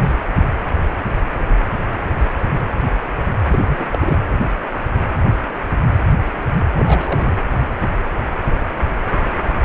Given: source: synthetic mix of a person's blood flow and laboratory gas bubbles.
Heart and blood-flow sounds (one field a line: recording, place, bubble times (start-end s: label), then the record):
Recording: Doppler ultrasound of blood flow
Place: precordium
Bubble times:
3.52-3.88 s: bubbles
3.92-4.19 s: bubbles
6.72-7.38 s: bubbles
From the record:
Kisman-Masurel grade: 222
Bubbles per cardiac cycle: several, 3 to 8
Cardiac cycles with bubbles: 10 to 50%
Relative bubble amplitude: moderate (0.250 to 0.450)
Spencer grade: 2 (many but less than half of the cardiac periods contain bubble signals, singularly or in groups)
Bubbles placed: anywhere in the cardiac cycle